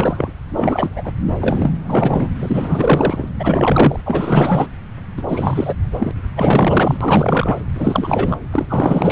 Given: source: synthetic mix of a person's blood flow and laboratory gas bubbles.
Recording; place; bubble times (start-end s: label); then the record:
Doppler ultrasound of blood flow; subclavian vein
0.00-0.32 s: bubbles
0.49-1.12 s: bubbles
1.40-1.72 s: bubbles
1.84-2.29 s: bubbles
2.40-3.29 s: bubbles
3.39-4.01 s: bubbles
4.05-4.67 s: bubbles
5.17-5.22 s: bubbles
5.27-5.74 s: bubbles
5.82-6.11 s: bubbles
6.36-6.98 s: bubbles
7.00-7.57 s: bubbles
7.75-8.37 s: bubbles
8.51-8.66 s: bubbles
8.69-9.12 s: bubbles
From the record:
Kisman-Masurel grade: 444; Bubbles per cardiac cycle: continuous sound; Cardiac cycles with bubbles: 100%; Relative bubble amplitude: maximal (0.775 to 0.999); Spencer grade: 4 (maximum detectable bubble signal sounding continuously throughout systole and diastole of every cardiac period, and overriding the amplitude of the normal cardiac signals); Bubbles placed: anywhere in the cardiac cycle